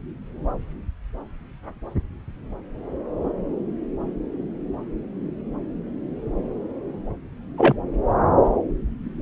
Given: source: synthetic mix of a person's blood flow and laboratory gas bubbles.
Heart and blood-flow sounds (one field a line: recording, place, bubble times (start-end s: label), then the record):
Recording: Doppler ultrasound of blood flow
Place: subclavian vein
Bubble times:
7.58-7.75 s: bubbles
From the record:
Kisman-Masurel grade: 113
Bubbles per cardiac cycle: 1 to 2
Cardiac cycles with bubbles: 1 to 10%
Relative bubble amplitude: loud (0.450 to 0.775)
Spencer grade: 1 (occasional bubble signal discernible with the cardiac motion signal, with majority of cardiac periods free of bubbles)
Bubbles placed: anywhere in the cardiac cycle